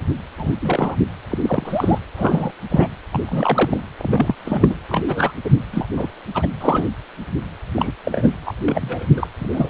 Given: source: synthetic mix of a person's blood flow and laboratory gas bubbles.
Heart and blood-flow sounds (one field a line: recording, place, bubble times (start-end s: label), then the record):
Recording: Doppler ultrasound of blood flow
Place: precordium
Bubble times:
0.00-0.02 s: bubbles
0.38-0.55 s: bubbles
0.61-0.95 s: bubbles
1.30-1.38 s: bubbles
1.43-1.99 s: bubbles
2.17-2.52 s: bubbles
2.70-2.88 s: bubbles
3.12-3.83 s: bubbles
3.98-4.35 s: bubbles
4.44-4.81 s: bubbles
4.88-5.32 s: bubbles
5.44-5.55 s: bubbles
5.71-5.87 s: bubbles
5.96-6.09 s: bubbles
6.34-6.47 s: bubbles
6.60-6.87 s: bubbles
7.75-7.92 s: bubbles
8.04-8.29 s: bubbles
8.46-8.53 s: bubbles
8.66-9.05 s: bubbles
9.15-9.27 s: bubbles
9.40-9.48 s: bubbles
9.52-9.70 s: bubbles
From the record:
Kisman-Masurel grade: 242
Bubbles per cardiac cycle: several, 3 to 8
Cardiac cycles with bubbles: 100%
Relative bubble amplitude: moderate (0.250 to 0.450)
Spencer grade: 3 (all of the cardiac periods contain showers or single bubble signals, but not dominating or overriding the cardiac motion signals)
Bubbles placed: anywhere in the cardiac cycle